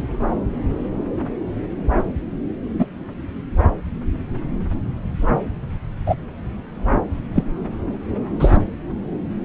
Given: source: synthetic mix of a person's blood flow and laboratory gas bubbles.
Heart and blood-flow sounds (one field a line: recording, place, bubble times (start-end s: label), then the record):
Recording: Doppler ultrasound of blood flow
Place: subclavian vein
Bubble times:
2.79-2.86 s: bubbles
6.06-6.15 s: bubbles
7.35-7.44 s: bubbles
8.39-8.57 s: bubbles
From the record:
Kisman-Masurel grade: 123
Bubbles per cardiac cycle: 1 to 2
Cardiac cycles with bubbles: 10 to 50%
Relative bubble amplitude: loud (0.450 to 0.775)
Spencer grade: 2 (many but less than half of the cardiac periods contain bubble signals, singularly or in groups)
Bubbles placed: anywhere in the cardiac cycle